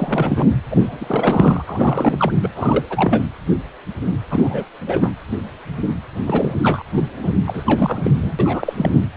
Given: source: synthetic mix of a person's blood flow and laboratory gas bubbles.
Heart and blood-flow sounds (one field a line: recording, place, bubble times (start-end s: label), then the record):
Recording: Doppler ultrasound of blood flow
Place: precordium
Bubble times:
0.00-0.48 s: bubbles
0.70-1.63 s: bubbles
1.66-2.33 s: bubbles
2.42-2.50 s: bubbles
2.55-2.86 s: bubbles
2.89-3.21 s: bubbles
4.30-4.65 s: bubbles
4.86-5.12 s: bubbles
6.26-6.54 s: bubbles
6.63-6.83 s: bubbles
6.94-7.04 s: bubbles
7.23-7.31 s: bubbles
7.46-7.63 s: bubbles
7.66-8.10 s: bubbles
8.22-8.73 s: bubbles
8.77-9.00 s: bubbles
From the record:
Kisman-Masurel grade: 332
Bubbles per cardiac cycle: rolling drumbeat, 9 or more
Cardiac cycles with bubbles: 50 to 99%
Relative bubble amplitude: moderate (0.250 to 0.450)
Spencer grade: 3 (all of the cardiac periods contain showers or single bubble signals, but not dominating or overriding the cardiac motion signals)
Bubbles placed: anywhere in the cardiac cycle